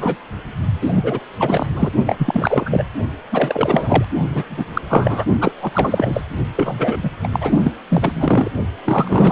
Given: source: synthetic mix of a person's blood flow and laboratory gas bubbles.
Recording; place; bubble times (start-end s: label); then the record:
Doppler ultrasound of blood flow; precordium
0.00-0.16 s: bubbles
0.81-1.19 s: bubbles
1.39-1.66 s: bubbles
1.75-1.90 s: bubbles
2.06-2.84 s: bubbles
3.32-4.05 s: bubbles
4.35-4.44 s: bubbles
4.49-4.82 s: bubbles
4.89-5.25 s: bubbles
5.41-5.52 s: bubbles
5.62-5.72 s: bubbles
5.74-6.22 s: bubbles
6.55-6.98 s: bubbles
7.03-7.10 s: bubbles
7.23-7.28 s: bubbles
7.32-7.51 s: bubbles
7.62-7.72 s: bubbles
7.90-8.49 s: bubbles
8.85-9.32 s: bubbles
From the record:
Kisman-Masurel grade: 343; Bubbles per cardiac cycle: rolling drumbeat, 9 or more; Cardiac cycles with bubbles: 100%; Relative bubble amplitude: loud (0.450 to 0.775); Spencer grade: 3 (all of the cardiac periods contain showers or single bubble signals, but not dominating or overriding the cardiac motion signals); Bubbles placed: only in the low amplitude regions of the cardiac cycle